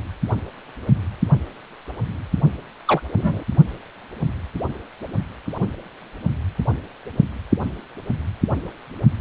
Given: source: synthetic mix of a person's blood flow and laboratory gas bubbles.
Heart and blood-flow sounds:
Doppler ultrasound of blood flow; precordium
2.87-3.01 s: bubbles
3.17-3.43 s: bubbles
From the record:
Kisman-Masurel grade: 113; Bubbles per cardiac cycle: 1 to 2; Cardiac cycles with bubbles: 1 to 10%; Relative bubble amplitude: loud (0.450 to 0.775); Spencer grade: 1 (occasional bubble signal discernible with the cardiac motion signal, with majority of cardiac periods free of bubbles); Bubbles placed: only in the low amplitude regions of the cardiac cycle

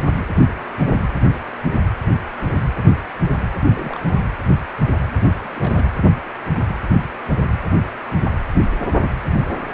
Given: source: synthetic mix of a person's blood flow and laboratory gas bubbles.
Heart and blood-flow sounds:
Doppler ultrasound of blood flow; precordium
3.63-4.15 s: bubbles
5.30-5.84 s: bubbles
From the record:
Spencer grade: 2 (many but less than half of the cardiac periods contain bubble signals, singularly or in groups); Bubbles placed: anywhere in the cardiac cycle

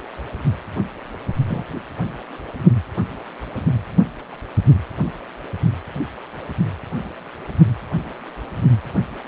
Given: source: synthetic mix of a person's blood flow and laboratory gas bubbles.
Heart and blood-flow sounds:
Doppler ultrasound of blood flow; precordium
1.48-1.64 s: bubbles
From the record:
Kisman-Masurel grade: 112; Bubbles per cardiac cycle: 1 to 2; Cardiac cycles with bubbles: 1 to 10%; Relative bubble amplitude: moderate (0.250 to 0.450); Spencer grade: 1 (occasional bubble signal discernible with the cardiac motion signal, with majority of cardiac periods free of bubbles); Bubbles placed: anywhere in the cardiac cycle

